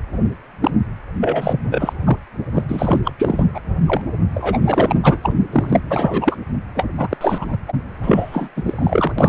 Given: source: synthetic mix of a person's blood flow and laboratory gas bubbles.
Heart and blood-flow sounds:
Doppler ultrasound of blood flow; precordium
0.61-0.71 s: bubbles
1.20-1.60 s: bubbles
1.70-1.93 s: bubbles
2.06-2.17 s: bubbles
2.54-2.63 s: bubbles
2.68-3.00 s: bubbles
3.04-3.12 s: bubbles
3.18-3.46 s: bubbles
3.54-3.60 s: bubbles
3.86-4.01 s: bubbles
4.34-4.58 s: bubbles
4.62-4.96 s: bubbles
5.03-5.17 s: bubbles
5.22-5.33 s: bubbles
5.52-5.80 s: bubbles
5.85-6.36 s: bubbles
6.75-6.85 s: bubbles
6.97-7.17 s: bubbles
7.21-7.57 s: bubbles
7.67-7.73 s: bubbles
8.02-8.49 s: bubbles
8.56-9.12 s: bubbles
9.18-9.29 s: bubbles
From the record:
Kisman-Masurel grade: 343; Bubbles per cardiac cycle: rolling drumbeat, 9 or more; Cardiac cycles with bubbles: 100%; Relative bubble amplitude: loud (0.450 to 0.775); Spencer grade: 3 (all of the cardiac periods contain showers or single bubble signals, but not dominating or overriding the cardiac motion signals); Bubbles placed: anywhere in the cardiac cycle

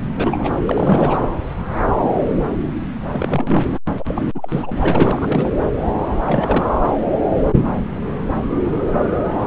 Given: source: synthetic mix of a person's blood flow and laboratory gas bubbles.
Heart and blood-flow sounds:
Doppler ultrasound of blood flow; subclavian vein
0.15-0.50 s: bubbles
0.67-1.21 s: bubbles
3.13-3.68 s: bubbles
3.99-4.28 s: bubbles
4.34-4.73 s: bubbles
4.79-5.52 s: bubbles
6.22-6.66 s: bubbles
From the record:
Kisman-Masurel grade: 332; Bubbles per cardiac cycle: rolling drumbeat, 9 or more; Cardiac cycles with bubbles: 50 to 99%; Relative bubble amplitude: moderate (0.250 to 0.450); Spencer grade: 3 (all of the cardiac periods contain showers or single bubble signals, but not dominating or overriding the cardiac motion signals); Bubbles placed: anywhere in the cardiac cycle

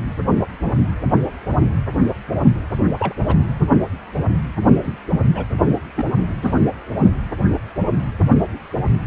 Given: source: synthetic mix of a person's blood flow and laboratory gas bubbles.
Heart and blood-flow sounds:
Doppler ultrasound of blood flow; precordium
2.98-3.14 s: bubbles
3.27-3.38 s: bubbles
4.82-4.98 s: bubbles
5.35-5.45 s: bubbles
5.95-6.11 s: bubbles
6.42-6.54 s: bubbles
From the record:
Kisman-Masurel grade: 122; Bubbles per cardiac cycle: 1 to 2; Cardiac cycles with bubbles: 10 to 50%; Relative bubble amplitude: moderate (0.250 to 0.450); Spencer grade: 2 (many but less than half of the cardiac periods contain bubble signals, singularly or in groups); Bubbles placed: anywhere in the cardiac cycle

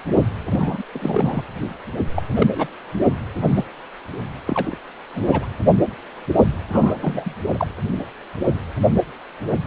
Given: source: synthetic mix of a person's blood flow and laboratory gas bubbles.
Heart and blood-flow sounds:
Doppler ultrasound of blood flow; precordium
0.51-0.83 s: bubbles
0.92-1.44 s: bubbles
2.16-2.22 s: bubbles
2.35-2.77 s: bubbles
3.36-3.65 s: bubbles
4.44-4.79 s: bubbles
5.14-5.46 s: bubbles
6.71-7.34 s: bubbles
7.49-7.66 s: bubbles
From the record:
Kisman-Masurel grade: 222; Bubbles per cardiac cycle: several, 3 to 8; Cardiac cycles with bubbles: 10 to 50%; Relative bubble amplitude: moderate (0.250 to 0.450); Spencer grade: 2 (many but less than half of the cardiac periods contain bubble signals, singularly or in groups); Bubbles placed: anywhere in the cardiac cycle

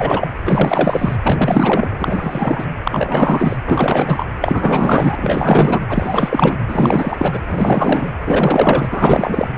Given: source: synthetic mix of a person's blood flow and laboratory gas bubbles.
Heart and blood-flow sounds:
Doppler ultrasound of blood flow; precordium
0.00-0.28 s: bubbles
0.45-1.16 s: bubbles
1.23-1.95 s: bubbles
1.98-2.67 s: bubbles
2.83-3.56 s: bubbles
3.66-4.26 s: bubbles
4.41-5.81 s: bubbles
5.89-6.57 s: bubbles
6.67-7.39 s: bubbles
7.47-8.11 s: bubbles
8.25-8.88 s: bubbles
8.91-9.51 s: bubbles
From the record:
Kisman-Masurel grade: 444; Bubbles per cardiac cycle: continuous sound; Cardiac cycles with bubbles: 100%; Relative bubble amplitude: maximal (0.775 to 0.999); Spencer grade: 4 (maximum detectable bubble signal sounding continuously throughout systole and diastole of every cardiac period, and overriding the amplitude of the normal cardiac signals); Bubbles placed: anywhere in the cardiac cycle

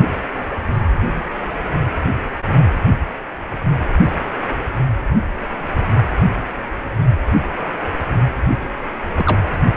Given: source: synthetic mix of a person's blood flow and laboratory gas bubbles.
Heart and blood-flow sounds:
Doppler ultrasound of blood flow; precordium
9.14-9.40 s: bubbles
From the record:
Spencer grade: 1 (occasional bubble signal discernible with the cardiac motion signal, with majority of cardiac periods free of bubbles); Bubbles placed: anywhere in the cardiac cycle

